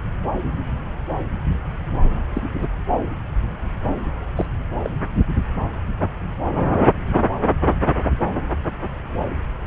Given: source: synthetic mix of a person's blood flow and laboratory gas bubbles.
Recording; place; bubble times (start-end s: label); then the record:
Doppler ultrasound of blood flow; subclavian vein
2.34-2.42 s: bubbles
2.58-2.69 s: bubbles
4.37-4.46 s: bubbles
4.83-4.90 s: bubbles
From the record:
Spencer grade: 2 (many but less than half of the cardiac periods contain bubble signals, singularly or in groups); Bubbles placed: anywhere in the cardiac cycle